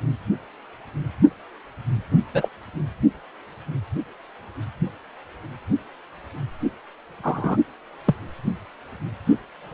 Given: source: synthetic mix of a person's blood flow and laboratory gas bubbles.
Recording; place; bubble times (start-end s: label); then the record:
Doppler ultrasound of blood flow; precordium
2.33-2.48 s: bubbles
7.23-7.57 s: bubbles
8.05-8.15 s: bubbles
9.71-9.74 s: bubbles
From the record:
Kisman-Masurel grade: 122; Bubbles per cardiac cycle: 1 to 2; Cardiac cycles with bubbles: 10 to 50%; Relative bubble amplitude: moderate (0.250 to 0.450); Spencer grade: 2 (many but less than half of the cardiac periods contain bubble signals, singularly or in groups); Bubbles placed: only in the low amplitude regions of the cardiac cycle